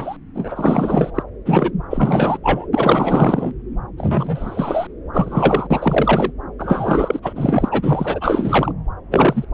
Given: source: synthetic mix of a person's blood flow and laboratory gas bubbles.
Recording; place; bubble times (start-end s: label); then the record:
Doppler ultrasound of blood flow; subclavian vein
0.00-0.16 s: bubbles
0.34-1.11 s: bubbles
1.15-1.22 s: bubbles
1.45-1.71 s: bubbles
1.91-2.38 s: bubbles
2.42-2.67 s: bubbles
2.73-3.51 s: bubbles
3.97-4.87 s: bubbles
5.13-5.67 s: bubbles
5.70-6.31 s: bubbles
6.58-7.33 s: bubbles
7.35-8.72 s: bubbles
9.11-9.45 s: bubbles
From the record:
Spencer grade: 4 (maximum detectable bubble signal sounding continuously throughout systole and diastole of every cardiac period, and overriding the amplitude of the normal cardiac signals); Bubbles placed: anywhere in the cardiac cycle